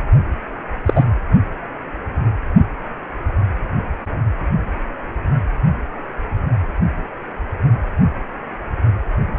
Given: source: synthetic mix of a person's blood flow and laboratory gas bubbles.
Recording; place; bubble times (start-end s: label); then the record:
Doppler ultrasound of blood flow; precordium
0.85-1.04 s: bubbles
From the record:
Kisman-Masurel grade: 113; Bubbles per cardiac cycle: 1 to 2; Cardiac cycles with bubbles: 1 to 10%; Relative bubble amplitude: loud (0.450 to 0.775); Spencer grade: 1 (occasional bubble signal discernible with the cardiac motion signal, with majority of cardiac periods free of bubbles); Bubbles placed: only in the low amplitude regions of the cardiac cycle